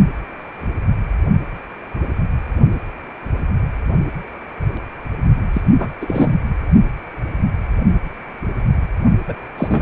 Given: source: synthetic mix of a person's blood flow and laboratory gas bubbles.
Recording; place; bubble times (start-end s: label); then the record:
Doppler ultrasound of blood flow; precordium
5.53-5.62 s: bubbles
5.79-5.91 s: bubbles
6.01-6.30 s: bubbles
9.29-9.34 s: bubbles
9.58-9.82 s: bubbles
From the record:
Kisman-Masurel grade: 223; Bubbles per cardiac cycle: several, 3 to 8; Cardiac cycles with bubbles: 10 to 50%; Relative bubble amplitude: loud (0.450 to 0.775); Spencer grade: 2 (many but less than half of the cardiac periods contain bubble signals, singularly or in groups); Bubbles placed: only in the low amplitude regions of the cardiac cycle